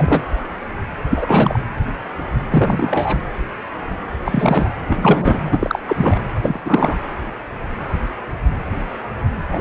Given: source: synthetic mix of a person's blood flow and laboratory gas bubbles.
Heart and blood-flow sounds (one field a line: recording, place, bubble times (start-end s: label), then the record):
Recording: Doppler ultrasound of blood flow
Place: precordium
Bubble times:
0.00-0.22 s: bubbles
1.10-1.59 s: bubbles
2.49-3.17 s: bubbles
4.25-4.69 s: bubbles
4.88-5.79 s: bubbles
5.88-6.19 s: bubbles
6.42-6.59 s: bubbles
6.64-6.96 s: bubbles
9.51-9.61 s: bubbles
From the record:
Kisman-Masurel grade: 333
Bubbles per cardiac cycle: rolling drumbeat, 9 or more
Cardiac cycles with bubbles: 50 to 99%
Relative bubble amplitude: loud (0.450 to 0.775)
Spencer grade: 3 (all of the cardiac periods contain showers or single bubble signals, but not dominating or overriding the cardiac motion signals)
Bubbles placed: anywhere in the cardiac cycle